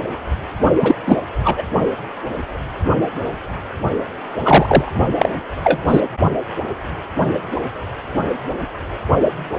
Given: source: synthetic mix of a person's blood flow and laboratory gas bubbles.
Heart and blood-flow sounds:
Doppler ultrasound of blood flow; precordium
0.80-0.95 s: bubbles
1.07-1.20 s: bubbles
1.44-1.64 s: bubbles
4.45-4.93 s: bubbles
5.18-5.29 s: bubbles
5.63-5.79 s: bubbles
5.88-6.01 s: bubbles
From the record:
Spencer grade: 2 (many but less than half of the cardiac periods contain bubble signals, singularly or in groups); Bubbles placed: only in the low amplitude regions of the cardiac cycle

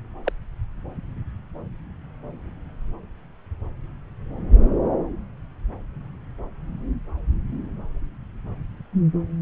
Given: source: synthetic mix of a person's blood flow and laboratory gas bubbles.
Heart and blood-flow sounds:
Doppler ultrasound of blood flow; subclavian vein
0.23-0.33 s: bubbles
From the record:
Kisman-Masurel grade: 112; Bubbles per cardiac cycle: 1 to 2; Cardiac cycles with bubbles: 1 to 10%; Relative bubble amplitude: moderate (0.250 to 0.450); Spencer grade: 1 (occasional bubble signal discernible with the cardiac motion signal, with majority of cardiac periods free of bubbles); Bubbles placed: anywhere in the cardiac cycle

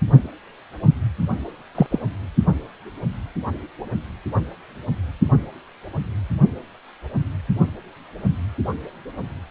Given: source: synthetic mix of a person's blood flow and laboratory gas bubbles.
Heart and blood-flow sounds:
Doppler ultrasound of blood flow; precordium
1.75-1.86 s: bubbles
1.92-1.99 s: bubbles
From the record:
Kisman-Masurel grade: 113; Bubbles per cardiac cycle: 1 to 2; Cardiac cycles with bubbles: 1 to 10%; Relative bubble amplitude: loud (0.450 to 0.775); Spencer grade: 1 (occasional bubble signal discernible with the cardiac motion signal, with majority of cardiac periods free of bubbles); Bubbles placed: only in the low amplitude regions of the cardiac cycle

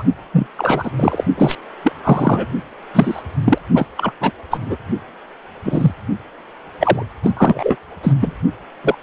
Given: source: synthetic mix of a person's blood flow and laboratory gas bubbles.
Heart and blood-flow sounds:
Doppler ultrasound of blood flow; precordium
0.00-0.03 s: bubbles
0.32-0.47 s: bubbles
0.58-0.91 s: bubbles
0.96-1.24 s: bubbles
1.38-1.55 s: bubbles
1.84-1.92 s: bubbles
2.04-2.46 s: bubbles
2.93-3.21 s: bubbles
3.41-3.58 s: bubbles
3.75-3.86 s: bubbles
3.97-4.12 s: bubbles
4.21-4.31 s: bubbles
4.50-4.59 s: bubbles
4.66-4.77 s: bubbles
5.64-5.92 s: bubbles
6.79-7.03 s: bubbles
7.23-7.31 s: bubbles
7.37-7.76 s: bubbles
8.03-8.13 s: bubbles
8.21-8.37 s: bubbles
8.83-8.95 s: bubbles
From the record:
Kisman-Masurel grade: 243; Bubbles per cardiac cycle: several, 3 to 8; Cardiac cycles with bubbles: 100%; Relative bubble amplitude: loud (0.450 to 0.775); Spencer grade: 3 (all of the cardiac periods contain showers or single bubble signals, but not dominating or overriding the cardiac motion signals); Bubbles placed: only in the low amplitude regions of the cardiac cycle

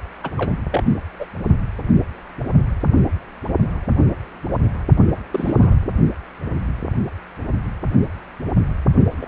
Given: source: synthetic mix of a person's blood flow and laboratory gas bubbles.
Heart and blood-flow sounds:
Doppler ultrasound of blood flow; precordium
0.23-0.31 s: bubbles
0.37-0.59 s: bubbles
0.71-0.83 s: bubbles
1.19-1.26 s: bubbles
5.32-5.75 s: bubbles
5.81-5.94 s: bubbles
9.21-9.28 s: bubbles
From the record:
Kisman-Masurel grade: 222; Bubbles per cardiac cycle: several, 3 to 8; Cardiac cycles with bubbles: 10 to 50%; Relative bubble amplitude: moderate (0.250 to 0.450); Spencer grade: 2 (many but less than half of the cardiac periods contain bubble signals, singularly or in groups); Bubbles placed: only in the low amplitude regions of the cardiac cycle

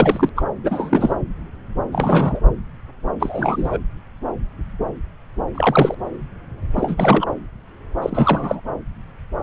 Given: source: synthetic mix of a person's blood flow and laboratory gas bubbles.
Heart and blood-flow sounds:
Doppler ultrasound of blood flow; subclavian vein
0.00-0.30 s: bubbles
0.36-0.44 s: bubbles
0.64-1.15 s: bubbles
1.92-2.40 s: bubbles
3.20-3.79 s: bubbles
5.54-5.95 s: bubbles
6.75-7.27 s: bubbles
8.02-8.60 s: bubbles
From the record:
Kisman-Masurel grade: 223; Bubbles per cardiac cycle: several, 3 to 8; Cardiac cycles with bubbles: 10 to 50%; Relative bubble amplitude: loud (0.450 to 0.775); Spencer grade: 2 (many but less than half of the cardiac periods contain bubble signals, singularly or in groups); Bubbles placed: anywhere in the cardiac cycle

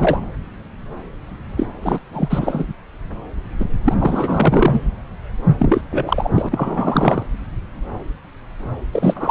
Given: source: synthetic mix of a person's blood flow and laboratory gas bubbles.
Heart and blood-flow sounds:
Doppler ultrasound of blood flow; subclavian vein
0.00-0.21 s: bubbles
1.57-1.69 s: bubbles
1.81-2.00 s: bubbles
2.13-2.65 s: bubbles
3.60-3.65 s: bubbles
3.84-4.81 s: bubbles
5.59-5.81 s: bubbles
5.90-6.30 s: bubbles
6.35-7.22 s: bubbles
8.92-9.31 s: bubbles
From the record:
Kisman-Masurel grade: 333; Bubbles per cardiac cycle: rolling drumbeat, 9 or more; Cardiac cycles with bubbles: 50 to 99%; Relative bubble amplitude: loud (0.450 to 0.775); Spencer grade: 3 (all of the cardiac periods contain showers or single bubble signals, but not dominating or overriding the cardiac motion signals); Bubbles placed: anywhere in the cardiac cycle

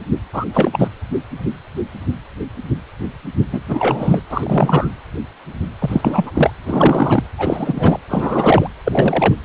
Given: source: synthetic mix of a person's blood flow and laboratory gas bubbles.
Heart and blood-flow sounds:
Doppler ultrasound of blood flow; precordium
0.32-0.45 s: bubbles
0.54-0.89 s: bubbles
3.52-3.60 s: bubbles
3.69-4.23 s: bubbles
4.29-4.89 s: bubbles
5.79-6.50 s: bubbles
6.65-7.24 s: bubbles
7.37-7.98 s: bubbles
8.08-8.70 s: bubbles
8.84-9.33 s: bubbles
From the record:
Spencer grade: 3 (all of the cardiac periods contain showers or single bubble signals, but not dominating or overriding the cardiac motion signals); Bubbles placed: anywhere in the cardiac cycle

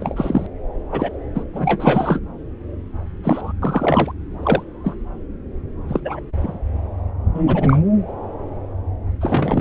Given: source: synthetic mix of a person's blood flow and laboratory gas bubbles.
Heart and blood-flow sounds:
Doppler ultrasound of blood flow; subclavian vein
0.00-0.47 s: bubbles
0.92-1.10 s: bubbles
1.34-1.44 s: bubbles
1.53-2.21 s: bubbles
3.23-3.53 s: bubbles
3.62-4.11 s: bubbles
4.43-4.63 s: bubbles
4.83-4.96 s: bubbles
5.88-6.00 s: bubbles
6.04-6.19 s: bubbles
6.37-6.59 s: bubbles
7.34-7.82 s: bubbles
9.21-9.61 s: bubbles
From the record:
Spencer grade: 3 (all of the cardiac periods contain showers or single bubble signals, but not dominating or overriding the cardiac motion signals); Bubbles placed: anywhere in the cardiac cycle

